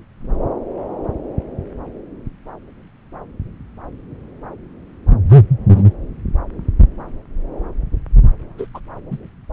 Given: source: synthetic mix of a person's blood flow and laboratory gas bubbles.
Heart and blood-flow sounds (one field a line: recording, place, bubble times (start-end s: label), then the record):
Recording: Doppler ultrasound of blood flow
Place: subclavian vein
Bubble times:
5.29-5.40 s: bubbles
5.70-5.84 s: bubbles
8.58-8.67 s: bubbles
8.74-8.80 s: bubbles
9.11-9.18 s: bubbles
From the record:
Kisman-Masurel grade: 122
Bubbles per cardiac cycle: 1 to 2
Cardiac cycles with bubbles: 10 to 50%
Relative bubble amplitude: moderate (0.250 to 0.450)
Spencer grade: 2 (many but less than half of the cardiac periods contain bubble signals, singularly or in groups)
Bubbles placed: anywhere in the cardiac cycle